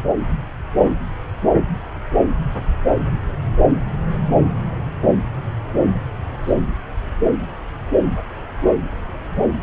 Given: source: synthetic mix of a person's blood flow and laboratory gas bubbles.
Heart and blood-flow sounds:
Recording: Doppler ultrasound of blood flow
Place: subclavian vein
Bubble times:
6.44-6.55 s: bubbles
From the record:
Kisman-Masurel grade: 111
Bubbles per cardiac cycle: 1 to 2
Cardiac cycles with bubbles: 1 to 10%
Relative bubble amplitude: barely perceptible (0.100 to 0.250)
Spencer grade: 1 (occasional bubble signal discernible with the cardiac motion signal, with majority of cardiac periods free of bubbles)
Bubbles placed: anywhere in the cardiac cycle

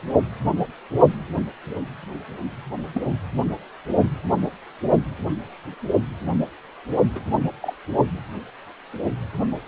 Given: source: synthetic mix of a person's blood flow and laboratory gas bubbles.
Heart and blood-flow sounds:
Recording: Doppler ultrasound of blood flow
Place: precordium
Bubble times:
2.93-3.02 s: bubbles
7.15-7.20 s: bubbles
7.62-7.74 s: bubbles
From the record:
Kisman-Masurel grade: 121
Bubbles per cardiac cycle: 1 to 2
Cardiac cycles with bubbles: 10 to 50%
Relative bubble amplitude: barely perceptible (0.100 to 0.250)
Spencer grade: 2 (many but less than half of the cardiac periods contain bubble signals, singularly or in groups)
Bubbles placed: only in the low amplitude regions of the cardiac cycle

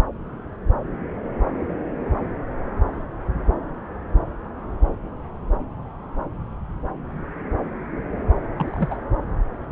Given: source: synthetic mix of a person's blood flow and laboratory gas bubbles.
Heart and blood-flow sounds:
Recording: Doppler ultrasound of blood flow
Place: subclavian vein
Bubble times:
8.56-8.96 s: bubbles
From the record:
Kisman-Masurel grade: 123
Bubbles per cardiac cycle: 1 to 2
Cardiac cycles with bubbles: 10 to 50%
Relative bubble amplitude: loud (0.450 to 0.775)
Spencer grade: 2 (many but less than half of the cardiac periods contain bubble signals, singularly or in groups)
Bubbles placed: anywhere in the cardiac cycle

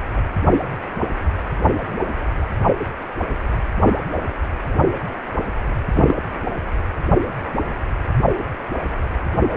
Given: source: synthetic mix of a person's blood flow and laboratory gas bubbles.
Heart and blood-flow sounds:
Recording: Doppler ultrasound of blood flow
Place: precordium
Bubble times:
5.95-6.12 s: bubbles
From the record:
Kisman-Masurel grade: 113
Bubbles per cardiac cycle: 1 to 2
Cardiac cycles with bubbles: 1 to 10%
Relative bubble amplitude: loud (0.450 to 0.775)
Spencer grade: 1 (occasional bubble signal discernible with the cardiac motion signal, with majority of cardiac periods free of bubbles)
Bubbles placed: anywhere in the cardiac cycle

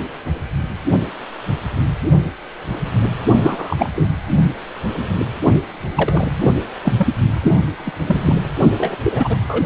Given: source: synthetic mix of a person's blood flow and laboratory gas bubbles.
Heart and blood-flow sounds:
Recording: Doppler ultrasound of blood flow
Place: precordium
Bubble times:
3.42-3.89 s: bubbles
3.95-4.09 s: bubbles
5.96-6.36 s: bubbles
6.40-6.55 s: bubbles
6.81-6.93 s: bubbles
6.97-7.08 s: bubbles
7.42-7.55 s: bubbles
7.86-7.92 s: bubbles
8.07-8.36 s: bubbles
8.78-8.96 s: bubbles
9.04-9.37 s: bubbles
9.48-9.61 s: bubbles
From the record:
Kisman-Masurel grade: 232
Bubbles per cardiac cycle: several, 3 to 8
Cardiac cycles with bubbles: 50 to 99%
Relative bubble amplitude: moderate (0.250 to 0.450)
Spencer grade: 3 (all of the cardiac periods contain showers or single bubble signals, but not dominating or overriding the cardiac motion signals)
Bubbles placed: only in the low amplitude regions of the cardiac cycle

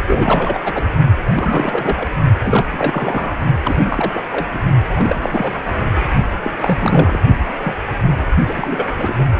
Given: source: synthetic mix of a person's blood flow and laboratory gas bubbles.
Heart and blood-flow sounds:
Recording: Doppler ultrasound of blood flow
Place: precordium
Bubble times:
0.07-0.59 s: bubbles
0.64-0.86 s: bubbles
1.33-2.08 s: bubbles
2.42-2.67 s: bubbles
2.72-3.31 s: bubbles
3.63-4.23 s: bubbles
4.32-4.48 s: bubbles
4.51-4.59 s: bubbles
4.94-5.62 s: bubbles
6.44-6.53 s: bubbles
6.58-7.20 s: bubbles
7.61-7.74 s: bubbles
8.47-8.87 s: bubbles
8.96-9.14 s: bubbles
9.18-9.26 s: bubbles
From the record:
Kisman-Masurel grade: 332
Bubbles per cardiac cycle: rolling drumbeat, 9 or more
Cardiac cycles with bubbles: 50 to 99%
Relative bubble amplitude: moderate (0.250 to 0.450)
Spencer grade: 3 (all of the cardiac periods contain showers or single bubble signals, but not dominating or overriding the cardiac motion signals)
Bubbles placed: only in the low amplitude regions of the cardiac cycle

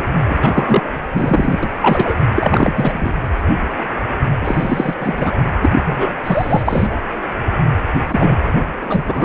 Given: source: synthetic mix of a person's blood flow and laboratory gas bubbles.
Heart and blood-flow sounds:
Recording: Doppler ultrasound of blood flow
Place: precordium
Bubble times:
0.00-0.02 s: bubbles
0.29-0.39 s: bubbles
0.41-0.92 s: bubbles
1.13-1.60 s: bubbles
1.62-1.71 s: bubbles
1.81-2.15 s: bubbles
2.35-2.73 s: bubbles
2.76-3.15 s: bubbles
4.41-4.94 s: bubbles
5.00-5.35 s: bubbles
5.62-5.83 s: bubbles
5.86-6.13 s: bubbles
6.24-6.88 s: bubbles
8.09-8.37 s: bubbles
8.81-9.25 s: bubbles
From the record:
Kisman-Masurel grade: 333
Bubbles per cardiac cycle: rolling drumbeat, 9 or more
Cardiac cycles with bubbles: 50 to 99%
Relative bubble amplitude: loud (0.450 to 0.775)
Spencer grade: 3 (all of the cardiac periods contain showers or single bubble signals, but not dominating or overriding the cardiac motion signals)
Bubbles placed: anywhere in the cardiac cycle

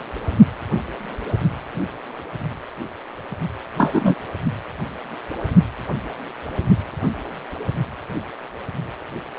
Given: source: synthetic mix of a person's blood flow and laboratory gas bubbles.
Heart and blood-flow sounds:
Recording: Doppler ultrasound of blood flow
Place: precordium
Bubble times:
3.77-4.14 s: bubbles
From the record:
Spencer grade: 2 (many but less than half of the cardiac periods contain bubble signals, singularly or in groups)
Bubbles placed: only in the low amplitude regions of the cardiac cycle

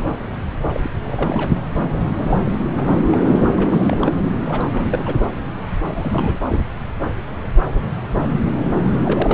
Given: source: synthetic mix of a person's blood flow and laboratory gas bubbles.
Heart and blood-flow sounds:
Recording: Doppler ultrasound of blood flow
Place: subclavian vein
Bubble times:
0.73-0.80 s: bubbles
0.83-0.91 s: bubbles
1.02-1.51 s: bubbles
2.17-2.38 s: bubbles
2.45-2.61 s: bubbles
2.76-2.93 s: bubbles
3.12-3.67 s: bubbles
3.71-4.12 s: bubbles
4.46-5.14 s: bubbles
5.87-6.41 s: bubbles
6.50-6.63 s: bubbles
9.04-9.33 s: bubbles
From the record:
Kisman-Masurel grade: 332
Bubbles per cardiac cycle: rolling drumbeat, 9 or more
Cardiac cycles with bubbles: 50 to 99%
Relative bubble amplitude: moderate (0.250 to 0.450)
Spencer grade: 3 (all of the cardiac periods contain showers or single bubble signals, but not dominating or overriding the cardiac motion signals)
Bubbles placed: anywhere in the cardiac cycle

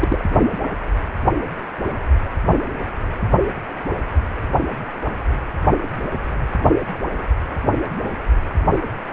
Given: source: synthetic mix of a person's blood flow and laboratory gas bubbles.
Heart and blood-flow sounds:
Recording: Doppler ultrasound of blood flow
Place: precordium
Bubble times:
0.00-0.25 s: bubbles
From the record:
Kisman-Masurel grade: 222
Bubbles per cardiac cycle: several, 3 to 8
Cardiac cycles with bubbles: 10 to 50%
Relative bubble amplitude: moderate (0.250 to 0.450)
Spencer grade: 2 (many but less than half of the cardiac periods contain bubble signals, singularly or in groups)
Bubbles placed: anywhere in the cardiac cycle

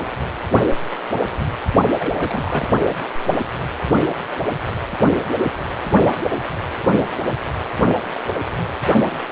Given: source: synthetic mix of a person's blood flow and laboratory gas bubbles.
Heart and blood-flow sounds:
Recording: Doppler ultrasound of blood flow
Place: precordium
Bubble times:
1.87-2.65 s: bubbles
From the record:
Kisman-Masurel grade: 212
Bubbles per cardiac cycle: several, 3 to 8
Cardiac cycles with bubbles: 1 to 10%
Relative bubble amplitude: moderate (0.250 to 0.450)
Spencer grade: 1 (occasional bubble signal discernible with the cardiac motion signal, with majority of cardiac periods free of bubbles)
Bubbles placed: only in the low amplitude regions of the cardiac cycle

